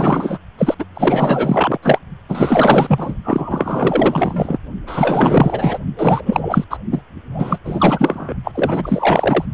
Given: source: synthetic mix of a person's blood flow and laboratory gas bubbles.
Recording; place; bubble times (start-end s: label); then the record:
Doppler ultrasound of blood flow; precordium
0.00-0.38 s: bubbles
0.57-0.74 s: bubbles
0.79-0.85 s: bubbles
0.94-1.78 s: bubbles
1.82-1.99 s: bubbles
2.29-3.16 s: bubbles
3.24-4.58 s: bubbles
4.86-5.79 s: bubbles
5.96-6.64 s: bubbles
6.69-6.77 s: bubbles
6.91-7.01 s: bubbles
7.33-7.57 s: bubbles
7.64-8.34 s: bubbles
8.44-8.52 s: bubbles
8.54-9.46 s: bubbles
From the record:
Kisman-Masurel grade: 444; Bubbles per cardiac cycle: continuous sound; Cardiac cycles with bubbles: 100%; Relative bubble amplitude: maximal (0.775 to 0.999); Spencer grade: 4 (maximum detectable bubble signal sounding continuously throughout systole and diastole of every cardiac period, and overriding the amplitude of the normal cardiac signals); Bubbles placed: only in the low amplitude regions of the cardiac cycle